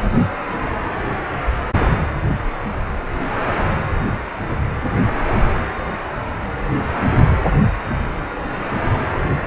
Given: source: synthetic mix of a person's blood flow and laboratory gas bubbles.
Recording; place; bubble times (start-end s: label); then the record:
Doppler ultrasound of blood flow; precordium
no bubbles
From the record:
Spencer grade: 0 (complete lack of bubble signals)